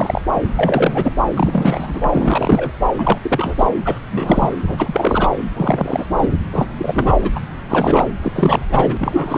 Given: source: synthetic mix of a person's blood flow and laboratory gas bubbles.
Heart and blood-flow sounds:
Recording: Doppler ultrasound of blood flow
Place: subclavian vein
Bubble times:
0.00-0.22 s: bubbles
0.35-0.47 s: bubbles
0.55-1.13 s: bubbles
1.31-2.71 s: bubbles
2.96-3.19 s: bubbles
3.22-3.55 s: bubbles
3.58-3.67 s: bubbles
3.84-3.99 s: bubbles
4.11-4.55 s: bubbles
4.63-5.29 s: bubbles
5.56-6.05 s: bubbles
6.17-6.29 s: bubbles
6.52-6.68 s: bubbles
6.78-7.15 s: bubbles
7.22-7.30 s: bubbles
7.35-7.40 s: bubbles
7.68-8.06 s: bubbles
8.22-8.32 s: bubbles
8.35-8.66 s: bubbles
8.69-9.38 s: bubbles
From the record:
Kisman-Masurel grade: 343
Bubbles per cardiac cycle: rolling drumbeat, 9 or more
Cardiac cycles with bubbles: 100%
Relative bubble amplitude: loud (0.450 to 0.775)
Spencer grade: 3 (all of the cardiac periods contain showers or single bubble signals, but not dominating or overriding the cardiac motion signals)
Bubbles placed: anywhere in the cardiac cycle

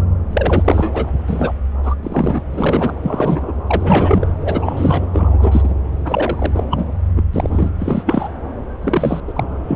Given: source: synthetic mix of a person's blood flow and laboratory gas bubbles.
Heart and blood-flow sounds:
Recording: Doppler ultrasound of blood flow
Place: subclavian vein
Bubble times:
0.33-1.11 s: bubbles
1.27-1.52 s: bubbles
1.83-1.94 s: bubbles
2.03-2.42 s: bubbles
2.53-2.95 s: bubbles
3.02-3.53 s: bubbles
3.67-4.28 s: bubbles
4.41-5.06 s: bubbles
5.13-5.75 s: bubbles
6.05-6.64 s: bubbles
6.70-6.86 s: bubbles
7.16-7.23 s: bubbles
7.33-7.71 s: bubbles
7.79-8.04 s: bubbles
8.06-8.29 s: bubbles
8.81-9.21 s: bubbles
9.27-9.33 s: bubbles
9.35-9.43 s: bubbles
9.67-9.76 s: bubbles
From the record:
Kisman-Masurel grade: 243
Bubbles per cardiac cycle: several, 3 to 8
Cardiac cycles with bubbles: 100%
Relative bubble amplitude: loud (0.450 to 0.775)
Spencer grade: 3 (all of the cardiac periods contain showers or single bubble signals, but not dominating or overriding the cardiac motion signals)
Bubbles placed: anywhere in the cardiac cycle

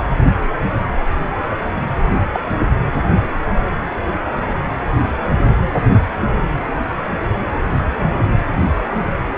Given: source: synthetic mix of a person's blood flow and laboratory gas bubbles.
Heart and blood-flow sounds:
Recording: Doppler ultrasound of blood flow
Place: precordium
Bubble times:
2.33-2.40 s: bubbles
From the record:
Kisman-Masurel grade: 113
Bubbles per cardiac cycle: 1 to 2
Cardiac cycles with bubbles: 1 to 10%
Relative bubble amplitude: loud (0.450 to 0.775)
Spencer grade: 1 (occasional bubble signal discernible with the cardiac motion signal, with majority of cardiac periods free of bubbles)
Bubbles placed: anywhere in the cardiac cycle

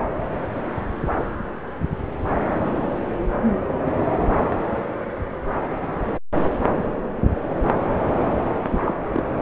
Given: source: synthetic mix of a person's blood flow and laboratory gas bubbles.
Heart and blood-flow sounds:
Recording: Doppler ultrasound of blood flow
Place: subclavian vein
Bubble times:
8.71-8.94 s: bubbles
9.13-9.23 s: bubbles
From the record:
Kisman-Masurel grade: 212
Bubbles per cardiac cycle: several, 3 to 8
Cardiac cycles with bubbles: 1 to 10%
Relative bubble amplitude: moderate (0.250 to 0.450)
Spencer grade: 1 (occasional bubble signal discernible with the cardiac motion signal, with majority of cardiac periods free of bubbles)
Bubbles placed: anywhere in the cardiac cycle

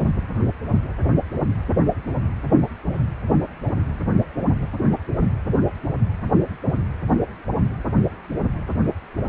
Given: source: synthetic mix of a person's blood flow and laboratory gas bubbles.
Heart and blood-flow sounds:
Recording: Doppler ultrasound of blood flow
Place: precordium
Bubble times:
no bubbles
From the record:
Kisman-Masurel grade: 000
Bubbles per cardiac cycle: 0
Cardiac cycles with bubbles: 0%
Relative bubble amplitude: no bubbles discernible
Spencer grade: 0 (complete lack of bubble signals)

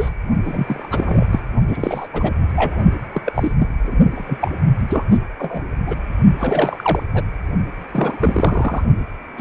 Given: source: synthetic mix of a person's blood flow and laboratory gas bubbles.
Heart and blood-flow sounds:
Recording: Doppler ultrasound of blood flow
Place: precordium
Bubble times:
0.00-0.10 s: bubbles
0.45-1.26 s: bubbles
1.31-1.39 s: bubbles
1.67-2.08 s: bubbles
2.13-2.33 s: bubbles
2.56-2.78 s: bubbles
3.14-3.22 s: bubbles
3.26-3.52 s: bubbles
3.59-3.69 s: bubbles
3.84-3.96 s: bubbles
4.15-4.38 s: bubbles
4.40-4.51 s: bubbles
4.88-5.04 s: bubbles
5.10-5.18 s: bubbles
5.39-5.62 s: bubbles
5.86-5.96 s: bubbles
6.38-7.03 s: bubbles
7.14-7.25 s: bubbles
7.92-8.17 s: bubbles
8.20-8.84 s: bubbles
9.38-9.41 s: bubbles
From the record:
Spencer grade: 3 (all of the cardiac periods contain showers or single bubble signals, but not dominating or overriding the cardiac motion signals)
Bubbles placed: only in the low amplitude regions of the cardiac cycle

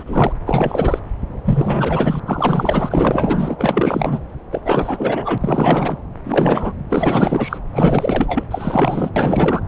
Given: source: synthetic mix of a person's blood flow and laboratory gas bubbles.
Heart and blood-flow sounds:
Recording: Doppler ultrasound of blood flow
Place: subclavian vein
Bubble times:
0.00-0.04 s: bubbles
0.06-0.33 s: bubbles
0.46-0.99 s: bubbles
1.44-2.20 s: bubbles
2.26-3.56 s: bubbles
3.58-4.22 s: bubbles
4.51-4.61 s: bubbles
4.64-5.38 s: bubbles
5.41-5.96 s: bubbles
6.25-6.73 s: bubbles
6.89-7.58 s: bubbles
7.73-8.44 s: bubbles
8.51-9.10 s: bubbles
9.16-9.61 s: bubbles
From the record:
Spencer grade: 4 (maximum detectable bubble signal sounding continuously throughout systole and diastole of every cardiac period, and overriding the amplitude of the normal cardiac signals)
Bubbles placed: anywhere in the cardiac cycle

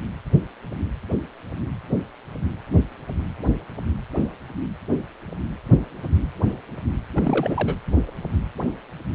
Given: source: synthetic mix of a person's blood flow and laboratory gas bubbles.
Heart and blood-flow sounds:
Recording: Doppler ultrasound of blood flow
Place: precordium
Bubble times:
7.15-7.76 s: bubbles
From the record:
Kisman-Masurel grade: 211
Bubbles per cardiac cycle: several, 3 to 8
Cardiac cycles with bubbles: 1 to 10%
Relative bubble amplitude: barely perceptible (0.100 to 0.250)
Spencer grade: 1 (occasional bubble signal discernible with the cardiac motion signal, with majority of cardiac periods free of bubbles)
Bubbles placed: anywhere in the cardiac cycle

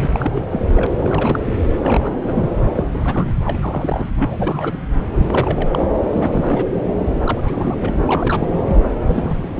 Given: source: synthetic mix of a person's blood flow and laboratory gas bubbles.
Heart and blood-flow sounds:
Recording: Doppler ultrasound of blood flow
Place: subclavian vein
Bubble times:
0.02-0.08 s: bubbles
0.12-0.42 s: bubbles
0.51-0.60 s: bubbles
0.68-0.86 s: bubbles
0.98-1.54 s: bubbles
1.82-2.15 s: bubbles
2.24-2.50 s: bubbles
2.75-2.86 s: bubbles
2.90-3.34 s: bubbles
3.44-3.58 s: bubbles
3.61-4.10 s: bubbles
4.17-4.79 s: bubbles
5.09-5.87 s: bubbles
6.12-6.64 s: bubbles
7.03-7.12 s: bubbles
7.26-7.98 s: bubbles
8.05-8.64 s: bubbles
8.68-8.82 s: bubbles
9.07-9.49 s: bubbles
9.55-9.60 s: bubbles
From the record:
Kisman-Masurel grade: 342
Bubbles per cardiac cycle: rolling drumbeat, 9 or more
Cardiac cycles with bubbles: 100%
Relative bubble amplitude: moderate (0.250 to 0.450)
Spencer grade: 3 (all of the cardiac periods contain showers or single bubble signals, but not dominating or overriding the cardiac motion signals)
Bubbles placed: anywhere in the cardiac cycle

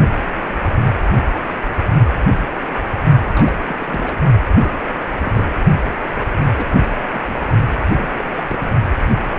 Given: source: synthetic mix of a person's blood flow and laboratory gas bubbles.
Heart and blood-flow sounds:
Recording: Doppler ultrasound of blood flow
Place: precordium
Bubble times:
3.19-3.32 s: bubbles
3.36-3.54 s: bubbles
3.68-3.75 s: bubbles
3.79-4.15 s: bubbles
4.54-4.79 s: bubbles
5.24-5.45 s: bubbles
6.18-6.26 s: bubbles
6.56-6.87 s: bubbles
7.08-7.45 s: bubbles
7.93-8.09 s: bubbles
8.16-8.25 s: bubbles
8.36-8.42 s: bubbles
8.47-8.70 s: bubbles
From the record:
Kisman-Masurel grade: 221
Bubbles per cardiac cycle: several, 3 to 8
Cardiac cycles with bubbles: 10 to 50%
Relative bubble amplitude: barely perceptible (0.100 to 0.250)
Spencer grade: 2 (many but less than half of the cardiac periods contain bubble signals, singularly or in groups)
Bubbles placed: only in the low amplitude regions of the cardiac cycle

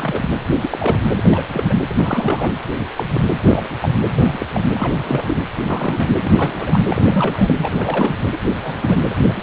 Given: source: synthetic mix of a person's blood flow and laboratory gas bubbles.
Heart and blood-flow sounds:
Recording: Doppler ultrasound of blood flow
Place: precordium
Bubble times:
0.00-0.29 s: bubbles
0.43-0.54 s: bubbles
0.60-0.97 s: bubbles
1.15-1.45 s: bubbles
1.53-1.75 s: bubbles
1.90-2.54 s: bubbles
2.79-2.85 s: bubbles
2.96-3.31 s: bubbles
3.34-3.68 s: bubbles
3.80-3.92 s: bubbles
4.15-4.46 s: bubbles
4.54-4.62 s: bubbles
4.74-5.37 s: bubbles
5.60-6.09 s: bubbles
6.22-6.84 s: bubbles
6.88-7.54 s: bubbles
7.58-8.17 s: bubbles
8.32-8.38 s: bubbles
8.49-8.56 s: bubbles
8.64-9.02 s: bubbles
9.10-9.15 s: bubbles
9.28-9.42 s: bubbles
From the record:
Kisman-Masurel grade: 242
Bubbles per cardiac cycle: several, 3 to 8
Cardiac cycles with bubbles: 100%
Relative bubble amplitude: moderate (0.250 to 0.450)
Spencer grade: 3 (all of the cardiac periods contain showers or single bubble signals, but not dominating or overriding the cardiac motion signals)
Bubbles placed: anywhere in the cardiac cycle

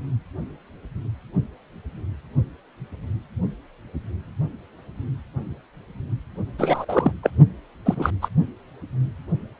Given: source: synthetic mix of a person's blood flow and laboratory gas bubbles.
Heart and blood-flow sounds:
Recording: Doppler ultrasound of blood flow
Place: precordium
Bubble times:
6.58-6.85 s: bubbles
6.88-7.12 s: bubbles
7.23-7.30 s: bubbles
7.86-8.11 s: bubbles
8.21-8.29 s: bubbles
From the record:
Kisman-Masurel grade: 223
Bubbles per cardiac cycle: several, 3 to 8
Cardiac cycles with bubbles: 10 to 50%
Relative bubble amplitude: loud (0.450 to 0.775)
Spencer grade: 2 (many but less than half of the cardiac periods contain bubble signals, singularly or in groups)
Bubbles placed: only in the low amplitude regions of the cardiac cycle

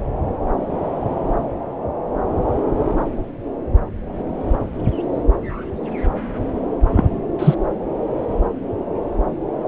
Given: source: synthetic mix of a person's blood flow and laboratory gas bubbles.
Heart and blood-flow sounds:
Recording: Doppler ultrasound of blood flow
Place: subclavian vein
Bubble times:
6.93-7.21 s: bubbles
7.38-7.54 s: bubbles
From the record:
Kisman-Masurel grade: 113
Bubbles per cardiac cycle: 1 to 2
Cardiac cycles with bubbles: 1 to 10%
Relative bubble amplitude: loud (0.450 to 0.775)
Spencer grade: 1 (occasional bubble signal discernible with the cardiac motion signal, with majority of cardiac periods free of bubbles)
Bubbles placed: anywhere in the cardiac cycle

